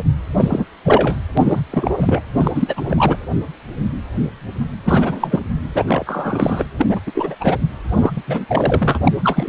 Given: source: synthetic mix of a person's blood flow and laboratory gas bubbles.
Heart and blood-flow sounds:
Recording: Doppler ultrasound of blood flow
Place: precordium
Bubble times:
0.37-0.65 s: bubbles
0.84-1.16 s: bubbles
1.37-1.61 s: bubbles
1.70-2.21 s: bubbles
2.37-2.52 s: bubbles
2.54-3.17 s: bubbles
4.85-5.40 s: bubbles
5.75-6.04 s: bubbles
6.06-6.65 s: bubbles
6.78-7.01 s: bubbles
7.07-7.35 s: bubbles
7.40-7.58 s: bubbles
7.92-8.12 s: bubbles
8.15-8.22 s: bubbles
8.28-8.97 s: bubbles
9.03-9.12 s: bubbles
9.23-9.49 s: bubbles
From the record:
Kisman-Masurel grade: 333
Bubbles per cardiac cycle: rolling drumbeat, 9 or more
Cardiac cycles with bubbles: 50 to 99%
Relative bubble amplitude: loud (0.450 to 0.775)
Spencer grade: 3 (all of the cardiac periods contain showers or single bubble signals, but not dominating or overriding the cardiac motion signals)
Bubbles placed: anywhere in the cardiac cycle

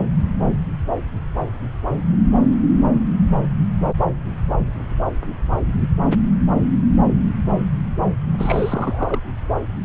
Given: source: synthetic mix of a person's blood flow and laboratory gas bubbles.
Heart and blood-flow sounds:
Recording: Doppler ultrasound of blood flow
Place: subclavian vein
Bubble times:
8.38-9.19 s: bubbles
From the record:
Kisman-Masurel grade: 211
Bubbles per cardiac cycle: several, 3 to 8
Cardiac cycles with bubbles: 1 to 10%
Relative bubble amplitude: barely perceptible (0.100 to 0.250)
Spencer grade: 1 (occasional bubble signal discernible with the cardiac motion signal, with majority of cardiac periods free of bubbles)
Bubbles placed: anywhere in the cardiac cycle

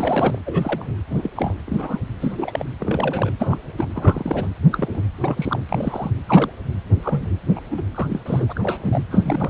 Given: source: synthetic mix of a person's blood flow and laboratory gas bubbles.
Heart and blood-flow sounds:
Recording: Doppler ultrasound of blood flow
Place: precordium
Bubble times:
0.00-0.39 s: bubbles
0.45-0.94 s: bubbles
1.10-1.30 s: bubbles
1.35-1.54 s: bubbles
1.66-1.99 s: bubbles
2.20-2.65 s: bubbles
2.79-3.30 s: bubbles
3.38-3.57 s: bubbles
3.77-3.85 s: bubbles
3.94-4.48 s: bubbles
4.72-5.03 s: bubbles
5.21-5.61 s: bubbles
5.69-6.11 s: bubbles
6.29-6.52 s: bubbles
7.02-7.40 s: bubbles
7.55-7.60 s: bubbles
7.71-7.83 s: bubbles
7.95-8.21 s: bubbles
8.25-8.53 s: bubbles
8.55-9.04 s: bubbles
9.10-9.50 s: bubbles
From the record:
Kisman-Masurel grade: 242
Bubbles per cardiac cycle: several, 3 to 8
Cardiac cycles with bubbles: 100%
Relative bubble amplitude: moderate (0.250 to 0.450)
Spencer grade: 3 (all of the cardiac periods contain showers or single bubble signals, but not dominating or overriding the cardiac motion signals)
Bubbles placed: anywhere in the cardiac cycle

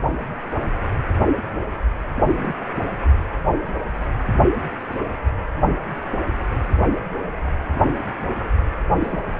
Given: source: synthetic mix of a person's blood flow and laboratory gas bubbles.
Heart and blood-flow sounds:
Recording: Doppler ultrasound of blood flow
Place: precordium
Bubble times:
2.16-2.54 s: bubbles
4.91-4.98 s: bubbles
5.05-5.14 s: bubbles
6.59-7.00 s: bubbles
9.00-9.17 s: bubbles
From the record:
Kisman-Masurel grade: 121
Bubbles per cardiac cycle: 1 to 2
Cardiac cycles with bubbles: 10 to 50%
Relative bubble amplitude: barely perceptible (0.100 to 0.250)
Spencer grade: 2 (many but less than half of the cardiac periods contain bubble signals, singularly or in groups)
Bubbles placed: anywhere in the cardiac cycle

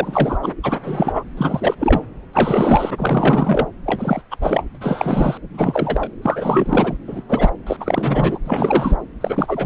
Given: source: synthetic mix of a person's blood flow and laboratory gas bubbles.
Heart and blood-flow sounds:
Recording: Doppler ultrasound of blood flow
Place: subclavian vein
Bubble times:
0.00-0.39 s: bubbles
0.42-0.53 s: bubbles
0.63-0.79 s: bubbles
0.84-1.23 s: bubbles
1.37-1.74 s: bubbles
1.79-2.01 s: bubbles
2.33-2.90 s: bubbles
2.98-3.67 s: bubbles
3.85-4.21 s: bubbles
4.31-4.37 s: bubbles
4.41-4.67 s: bubbles
4.75-4.78 s: bubbles
4.80-5.38 s: bubbles
5.54-6.09 s: bubbles
6.21-6.98 s: bubbles
7.08-7.22 s: bubbles
7.29-7.51 s: bubbles
7.67-7.76 s: bubbles
7.80-8.38 s: bubbles
8.45-8.96 s: bubbles
9.21-9.66 s: bubbles
From the record:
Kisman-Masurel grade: 343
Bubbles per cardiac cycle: rolling drumbeat, 9 or more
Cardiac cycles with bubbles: 100%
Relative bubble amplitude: loud (0.450 to 0.775)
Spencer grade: 3 (all of the cardiac periods contain showers or single bubble signals, but not dominating or overriding the cardiac motion signals)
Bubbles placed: anywhere in the cardiac cycle

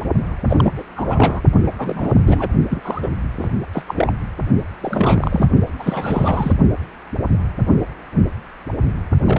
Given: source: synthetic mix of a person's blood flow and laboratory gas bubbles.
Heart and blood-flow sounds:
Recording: Doppler ultrasound of blood flow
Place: precordium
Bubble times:
0.48-0.83 s: bubbles
0.96-1.42 s: bubbles
1.66-1.72 s: bubbles
1.78-2.20 s: bubbles
2.26-2.52 s: bubbles
2.69-3.08 s: bubbles
3.38-3.50 s: bubbles
3.73-3.82 s: bubbles
3.87-4.12 s: bubbles
4.80-5.49 s: bubbles
5.79-6.53 s: bubbles
9.27-9.39 s: bubbles
From the record:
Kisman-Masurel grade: 332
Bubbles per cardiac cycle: rolling drumbeat, 9 or more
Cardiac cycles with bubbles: 50 to 99%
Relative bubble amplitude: moderate (0.250 to 0.450)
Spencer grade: 3 (all of the cardiac periods contain showers or single bubble signals, but not dominating or overriding the cardiac motion signals)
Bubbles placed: only in the low amplitude regions of the cardiac cycle

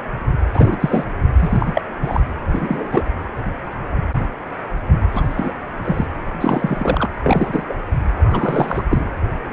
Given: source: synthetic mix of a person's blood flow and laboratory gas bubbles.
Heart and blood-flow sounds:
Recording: Doppler ultrasound of blood flow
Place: precordium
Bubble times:
0.53-0.78 s: bubbles
0.80-1.04 s: bubbles
1.39-1.82 s: bubbles
2.01-2.21 s: bubbles
2.52-3.03 s: bubbles
3.44-3.51 s: bubbles
5.12-5.52 s: bubbles
5.84-6.07 s: bubbles
6.41-7.09 s: bubbles
7.23-7.63 s: bubbles
7.68-7.74 s: bubbles
8.19-8.83 s: bubbles
8.89-9.11 s: bubbles
From the record:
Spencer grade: 3 (all of the cardiac periods contain showers or single bubble signals, but not dominating or overriding the cardiac motion signals)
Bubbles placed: anywhere in the cardiac cycle

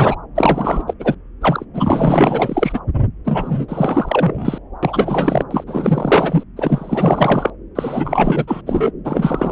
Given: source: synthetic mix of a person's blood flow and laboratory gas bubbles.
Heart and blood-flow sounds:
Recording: Doppler ultrasound of blood flow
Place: subclavian vein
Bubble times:
0.00-0.15 s: bubbles
0.35-0.84 s: bubbles
0.87-0.93 s: bubbles
0.99-1.15 s: bubbles
1.41-1.65 s: bubbles
1.74-2.80 s: bubbles
3.25-4.58 s: bubbles
4.82-5.43 s: bubbles
5.50-5.64 s: bubbles
5.67-6.43 s: bubbles
6.56-7.50 s: bubbles
7.75-8.62 s: bubbles
8.66-8.91 s: bubbles
9.04-9.52 s: bubbles
From the record:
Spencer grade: 4 (maximum detectable bubble signal sounding continuously throughout systole and diastole of every cardiac period, and overriding the amplitude of the normal cardiac signals)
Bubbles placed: anywhere in the cardiac cycle

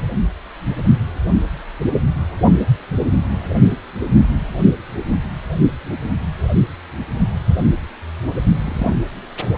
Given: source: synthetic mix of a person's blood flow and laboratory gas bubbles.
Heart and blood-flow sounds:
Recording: Doppler ultrasound of blood flow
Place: precordium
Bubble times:
8.64-8.95 s: bubbles
From the record:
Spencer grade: 1 (occasional bubble signal discernible with the cardiac motion signal, with majority of cardiac periods free of bubbles)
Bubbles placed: only in the low amplitude regions of the cardiac cycle

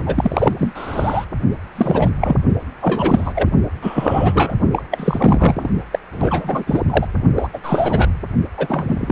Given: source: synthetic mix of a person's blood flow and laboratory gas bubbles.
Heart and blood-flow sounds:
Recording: Doppler ultrasound of blood flow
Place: precordium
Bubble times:
0.00-0.03 s: bubbles
0.06-0.53 s: bubbles
0.58-1.26 s: bubbles
1.75-2.10 s: bubbles
2.21-2.37 s: bubbles
2.81-3.50 s: bubbles
3.81-4.53 s: bubbles
4.72-4.82 s: bubbles
4.91-5.69 s: bubbles
5.92-5.98 s: bubbles
6.12-6.64 s: bubbles
6.67-6.81 s: bubbles
6.89-7.07 s: bubbles
7.35-7.48 s: bubbles
7.53-7.59 s: bubbles
7.63-8.10 s: bubbles
8.58-9.12 s: bubbles
From the record:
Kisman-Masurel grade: 343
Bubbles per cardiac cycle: rolling drumbeat, 9 or more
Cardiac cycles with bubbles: 100%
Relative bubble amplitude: loud (0.450 to 0.775)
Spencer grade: 3 (all of the cardiac periods contain showers or single bubble signals, but not dominating or overriding the cardiac motion signals)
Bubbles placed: only in the low amplitude regions of the cardiac cycle

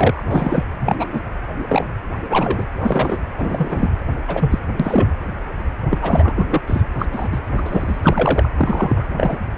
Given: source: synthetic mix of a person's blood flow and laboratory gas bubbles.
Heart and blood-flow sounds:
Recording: Doppler ultrasound of blood flow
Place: precordium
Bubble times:
0.00-0.23 s: bubbles
0.28-0.64 s: bubbles
0.79-0.95 s: bubbles
0.99-1.06 s: bubbles
1.13-1.20 s: bubbles
1.68-1.87 s: bubbles
2.30-2.64 s: bubbles
2.81-3.18 s: bubbles
3.37-3.89 s: bubbles
4.27-4.59 s: bubbles
4.79-5.10 s: bubbles
5.91-5.99 s: bubbles
6.01-6.48 s: bubbles
6.50-6.62 s: bubbles
6.67-6.83 s: bubbles
6.99-7.06 s: bubbles
7.12-7.40 s: bubbles
7.54-7.62 s: bubbles
7.65-8.48 s: bubbles
8.56-9.05 s: bubbles
9.16-9.38 s: bubbles
From the record:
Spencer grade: 3 (all of the cardiac periods contain showers or single bubble signals, but not dominating or overriding the cardiac motion signals)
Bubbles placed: anywhere in the cardiac cycle

